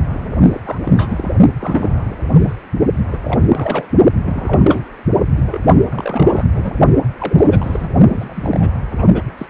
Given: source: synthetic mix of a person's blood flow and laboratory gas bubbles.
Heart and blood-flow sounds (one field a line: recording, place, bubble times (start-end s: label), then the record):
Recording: Doppler ultrasound of blood flow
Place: precordium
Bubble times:
0.10-0.60 s: bubbles
0.65-0.78 s: bubbles
0.82-1.31 s: bubbles
1.59-2.17 s: bubbles
2.33-2.56 s: bubbles
3.06-3.20 s: bubbles
3.25-3.47 s: bubbles
3.50-3.86 s: bubbles
4.24-4.84 s: bubbles
5.36-5.42 s: bubbles
5.47-5.61 s: bubbles
5.90-6.49 s: bubbles
6.54-6.79 s: bubbles
7.18-7.89 s: bubbles
8.11-8.78 s: bubbles
8.92-9.07 s: bubbles
9.13-9.22 s: bubbles
9.38-9.46 s: bubbles
From the record:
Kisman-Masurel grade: 342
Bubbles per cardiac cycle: rolling drumbeat, 9 or more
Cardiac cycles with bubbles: 100%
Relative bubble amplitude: moderate (0.250 to 0.450)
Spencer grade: 3 (all of the cardiac periods contain showers or single bubble signals, but not dominating or overriding the cardiac motion signals)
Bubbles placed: only in the low amplitude regions of the cardiac cycle